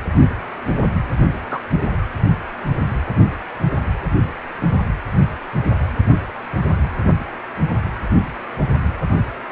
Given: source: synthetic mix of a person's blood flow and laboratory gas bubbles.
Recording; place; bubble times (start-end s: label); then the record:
Doppler ultrasound of blood flow; precordium
1.51-1.59 s: bubbles
From the record:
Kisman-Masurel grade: 113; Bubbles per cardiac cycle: 1 to 2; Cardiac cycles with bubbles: 1 to 10%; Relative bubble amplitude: loud (0.450 to 0.775); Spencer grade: 1 (occasional bubble signal discernible with the cardiac motion signal, with majority of cardiac periods free of bubbles); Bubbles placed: anywhere in the cardiac cycle